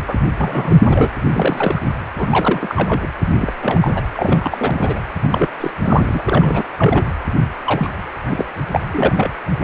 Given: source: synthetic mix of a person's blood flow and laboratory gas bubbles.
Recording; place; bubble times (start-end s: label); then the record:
Doppler ultrasound of blood flow; precordium
0.07-0.15 s: bubbles
0.40-1.08 s: bubbles
1.23-1.80 s: bubbles
2.17-3.08 s: bubbles
3.39-3.53 s: bubbles
3.62-4.02 s: bubbles
4.12-5.00 s: bubbles
5.23-5.49 s: bubbles
5.60-5.71 s: bubbles
5.83-6.21 s: bubbles
6.25-6.63 s: bubbles
6.78-7.06 s: bubbles
7.64-7.89 s: bubbles
8.23-8.46 s: bubbles
8.71-8.80 s: bubbles
8.91-9.30 s: bubbles
9.59-9.64 s: bubbles
From the record:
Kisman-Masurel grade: 342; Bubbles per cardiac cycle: rolling drumbeat, 9 or more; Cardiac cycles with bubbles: 100%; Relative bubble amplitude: moderate (0.250 to 0.450); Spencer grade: 3 (all of the cardiac periods contain showers or single bubble signals, but not dominating or overriding the cardiac motion signals); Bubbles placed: anywhere in the cardiac cycle